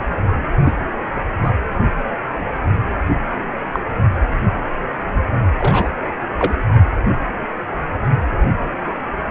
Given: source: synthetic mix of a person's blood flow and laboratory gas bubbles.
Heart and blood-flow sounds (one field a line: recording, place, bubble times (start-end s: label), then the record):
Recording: Doppler ultrasound of blood flow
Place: precordium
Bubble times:
0.65-0.72 s: bubbles
1.43-1.51 s: bubbles
3.72-3.79 s: bubbles
5.58-5.90 s: bubbles
6.38-6.54 s: bubbles
From the record:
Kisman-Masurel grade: 122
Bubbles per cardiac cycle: 1 to 2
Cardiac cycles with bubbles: 10 to 50%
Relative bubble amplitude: moderate (0.250 to 0.450)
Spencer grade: 2 (many but less than half of the cardiac periods contain bubble signals, singularly or in groups)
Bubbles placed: anywhere in the cardiac cycle